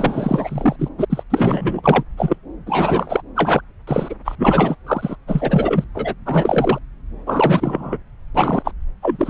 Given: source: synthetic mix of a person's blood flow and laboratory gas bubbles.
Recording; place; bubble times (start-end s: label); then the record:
Doppler ultrasound of blood flow; subclavian vein
0.00-0.76 s: bubbles
0.78-0.89 s: bubbles
0.98-1.05 s: bubbles
1.09-1.23 s: bubbles
1.30-2.03 s: bubbles
2.17-2.36 s: bubbles
2.67-3.21 s: bubbles
3.35-3.61 s: bubbles
3.87-4.14 s: bubbles
4.24-4.36 s: bubbles
4.38-4.75 s: bubbles
4.87-5.16 s: bubbles
5.28-5.84 s: bubbles
5.95-6.14 s: bubbles
6.26-6.79 s: bubbles
7.27-7.97 s: bubbles
8.35-8.71 s: bubbles
9.02-9.30 s: bubbles
From the record:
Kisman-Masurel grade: 343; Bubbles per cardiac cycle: rolling drumbeat, 9 or more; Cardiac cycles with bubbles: 100%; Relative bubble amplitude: loud (0.450 to 0.775); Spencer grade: 3 (all of the cardiac periods contain showers or single bubble signals, but not dominating or overriding the cardiac motion signals); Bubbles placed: anywhere in the cardiac cycle